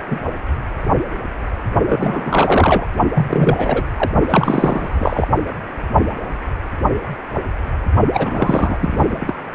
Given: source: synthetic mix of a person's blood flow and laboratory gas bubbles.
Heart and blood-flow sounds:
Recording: Doppler ultrasound of blood flow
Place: precordium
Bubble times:
0.06-0.18 s: bubbles
1.86-2.87 s: bubbles
3.15-3.84 s: bubbles
3.97-4.10 s: bubbles
4.28-5.26 s: bubbles
8.12-9.34 s: bubbles
From the record:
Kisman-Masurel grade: 333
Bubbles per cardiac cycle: rolling drumbeat, 9 or more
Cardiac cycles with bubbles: 50 to 99%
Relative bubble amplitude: loud (0.450 to 0.775)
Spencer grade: 3 (all of the cardiac periods contain showers or single bubble signals, but not dominating or overriding the cardiac motion signals)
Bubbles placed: only in the low amplitude regions of the cardiac cycle

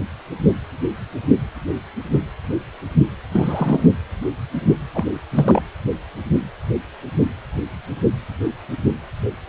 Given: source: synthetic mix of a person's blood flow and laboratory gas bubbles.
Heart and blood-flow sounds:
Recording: Doppler ultrasound of blood flow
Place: precordium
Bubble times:
3.31-3.91 s: bubbles
4.94-5.04 s: bubbles
5.33-5.62 s: bubbles
From the record:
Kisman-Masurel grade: 222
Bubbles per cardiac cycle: several, 3 to 8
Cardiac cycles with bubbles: 10 to 50%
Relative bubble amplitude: moderate (0.250 to 0.450)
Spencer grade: 2 (many but less than half of the cardiac periods contain bubble signals, singularly or in groups)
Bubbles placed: anywhere in the cardiac cycle

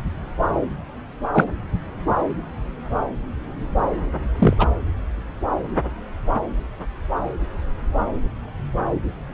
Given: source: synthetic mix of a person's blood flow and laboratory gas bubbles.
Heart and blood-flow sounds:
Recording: Doppler ultrasound of blood flow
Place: subclavian vein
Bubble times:
1.33-1.47 s: bubbles
4.38-4.54 s: bubbles
4.58-4.67 s: bubbles
From the record:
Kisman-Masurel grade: 123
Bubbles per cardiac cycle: 1 to 2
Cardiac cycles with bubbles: 10 to 50%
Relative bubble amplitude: loud (0.450 to 0.775)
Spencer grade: 2 (many but less than half of the cardiac periods contain bubble signals, singularly or in groups)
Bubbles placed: anywhere in the cardiac cycle

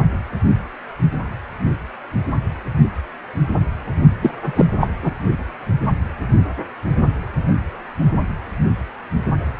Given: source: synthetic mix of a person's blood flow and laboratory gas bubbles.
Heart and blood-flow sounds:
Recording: Doppler ultrasound of blood flow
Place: precordium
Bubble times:
4.21-4.31 s: bubbles
4.45-4.67 s: bubbles
4.80-4.88 s: bubbles
5.02-5.16 s: bubbles
From the record:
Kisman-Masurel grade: 213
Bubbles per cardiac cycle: several, 3 to 8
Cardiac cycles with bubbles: 1 to 10%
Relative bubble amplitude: loud (0.450 to 0.775)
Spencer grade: 1 (occasional bubble signal discernible with the cardiac motion signal, with majority of cardiac periods free of bubbles)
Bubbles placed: only in the low amplitude regions of the cardiac cycle

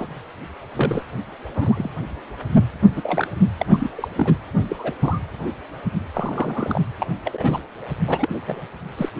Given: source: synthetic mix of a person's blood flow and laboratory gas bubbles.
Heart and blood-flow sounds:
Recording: Doppler ultrasound of blood flow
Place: precordium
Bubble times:
0.00-0.07 s: bubbles
0.76-1.03 s: bubbles
1.55-1.90 s: bubbles
2.96-3.27 s: bubbles
3.58-3.66 s: bubbles
3.73-3.90 s: bubbles
3.98-4.08 s: bubbles
4.15-4.34 s: bubbles
4.69-4.76 s: bubbles
4.78-4.92 s: bubbles
5.02-5.19 s: bubbles
6.13-6.81 s: bubbles
6.99-7.06 s: bubbles
7.24-7.58 s: bubbles
8.07-8.37 s: bubbles
8.46-8.62 s: bubbles
8.97-9.09 s: bubbles
From the record:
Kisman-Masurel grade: 232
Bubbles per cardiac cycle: several, 3 to 8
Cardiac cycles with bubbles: 50 to 99%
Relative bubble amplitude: moderate (0.250 to 0.450)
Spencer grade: 3 (all of the cardiac periods contain showers or single bubble signals, but not dominating or overriding the cardiac motion signals)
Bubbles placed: anywhere in the cardiac cycle

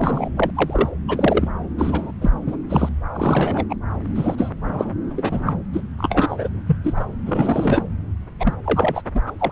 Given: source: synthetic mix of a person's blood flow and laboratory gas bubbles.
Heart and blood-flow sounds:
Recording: Doppler ultrasound of blood flow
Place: subclavian vein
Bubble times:
0.00-0.29 s: bubbles
0.37-0.52 s: bubbles
0.55-0.89 s: bubbles
1.08-1.48 s: bubbles
1.78-2.11 s: bubbles
2.21-2.30 s: bubbles
2.46-2.56 s: bubbles
2.69-2.89 s: bubbles
3.13-3.65 s: bubbles
3.69-3.75 s: bubbles
4.15-4.50 s: bubbles
4.64-4.94 s: bubbles
5.11-5.54 s: bubbles
5.73-5.81 s: bubbles
5.98-6.49 s: bubbles
6.67-6.78 s: bubbles
6.83-7.05 s: bubbles
7.25-7.85 s: bubbles
8.39-8.54 s: bubbles
8.64-9.01 s: bubbles
9.14-9.21 s: bubbles
9.26-9.32 s: bubbles
9.38-9.51 s: bubbles
From the record:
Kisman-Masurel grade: 243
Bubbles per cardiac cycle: several, 3 to 8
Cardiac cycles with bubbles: 100%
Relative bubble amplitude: loud (0.450 to 0.775)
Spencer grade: 3 (all of the cardiac periods contain showers or single bubble signals, but not dominating or overriding the cardiac motion signals)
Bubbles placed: anywhere in the cardiac cycle

